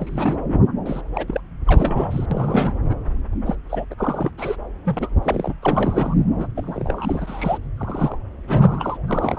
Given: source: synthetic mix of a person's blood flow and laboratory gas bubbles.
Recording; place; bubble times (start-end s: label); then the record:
Doppler ultrasound of blood flow; subclavian vein
0.00-0.36 s: bubbles
0.86-1.01 s: bubbles
1.14-1.41 s: bubbles
1.67-2.26 s: bubbles
2.31-2.73 s: bubbles
2.89-2.95 s: bubbles
3.46-3.55 s: bubbles
3.69-3.85 s: bubbles
3.90-3.94 s: bubbles
3.98-4.31 s: bubbles
4.38-4.57 s: bubbles
4.85-5.08 s: bubbles
5.23-5.54 s: bubbles
5.62-6.14 s: bubbles
6.38-6.47 s: bubbles
6.56-7.58 s: bubbles
7.77-8.19 s: bubbles
8.47-8.97 s: bubbles
9.07-9.38 s: bubbles
From the record:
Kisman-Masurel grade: 342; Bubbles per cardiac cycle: rolling drumbeat, 9 or more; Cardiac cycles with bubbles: 100%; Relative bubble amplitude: moderate (0.250 to 0.450); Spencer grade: 3 (all of the cardiac periods contain showers or single bubble signals, but not dominating or overriding the cardiac motion signals); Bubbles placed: anywhere in the cardiac cycle